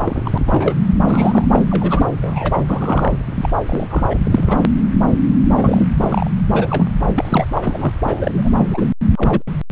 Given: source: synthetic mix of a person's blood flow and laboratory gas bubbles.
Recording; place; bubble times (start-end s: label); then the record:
Doppler ultrasound of blood flow; subclavian vein
0.00-0.38 s: bubbles
0.46-0.76 s: bubbles
1.05-1.44 s: bubbles
1.52-1.61 s: bubbles
1.65-2.12 s: bubbles
2.21-2.63 s: bubbles
2.67-3.12 s: bubbles
3.35-3.50 s: bubbles
3.66-4.06 s: bubbles
4.10-4.20 s: bubbles
4.23-4.71 s: bubbles
5.57-5.87 s: bubbles
5.98-6.31 s: bubbles
6.47-6.88 s: bubbles
7.15-7.46 s: bubbles
7.54-7.93 s: bubbles
8.03-8.49 s: bubbles
8.54-8.93 s: bubbles
9.16-9.42 s: bubbles
From the record:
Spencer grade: 3 (all of the cardiac periods contain showers or single bubble signals, but not dominating or overriding the cardiac motion signals); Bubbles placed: anywhere in the cardiac cycle